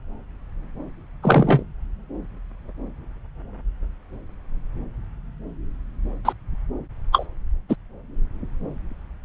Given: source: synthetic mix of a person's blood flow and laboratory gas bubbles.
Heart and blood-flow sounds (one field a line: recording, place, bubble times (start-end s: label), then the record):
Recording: Doppler ultrasound of blood flow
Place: subclavian vein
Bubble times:
1.22-1.63 s: bubbles
6.25-6.33 s: bubbles
7.12-7.26 s: bubbles
7.69-7.75 s: bubbles
From the record:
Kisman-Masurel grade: 123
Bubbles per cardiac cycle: 1 to 2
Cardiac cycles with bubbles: 10 to 50%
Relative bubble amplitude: loud (0.450 to 0.775)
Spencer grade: 2 (many but less than half of the cardiac periods contain bubble signals, singularly or in groups)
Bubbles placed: anywhere in the cardiac cycle